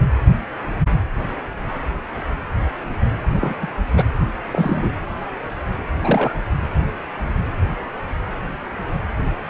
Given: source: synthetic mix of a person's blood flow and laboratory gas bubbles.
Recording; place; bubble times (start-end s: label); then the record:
Doppler ultrasound of blood flow; precordium
3.31-3.54 s: bubbles
3.61-3.67 s: bubbles
3.96-4.04 s: bubbles
4.46-4.91 s: bubbles
6.02-6.34 s: bubbles
From the record:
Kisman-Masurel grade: 222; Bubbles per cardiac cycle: several, 3 to 8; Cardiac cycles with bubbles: 10 to 50%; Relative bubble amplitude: moderate (0.250 to 0.450); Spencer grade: 2 (many but less than half of the cardiac periods contain bubble signals, singularly or in groups); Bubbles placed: anywhere in the cardiac cycle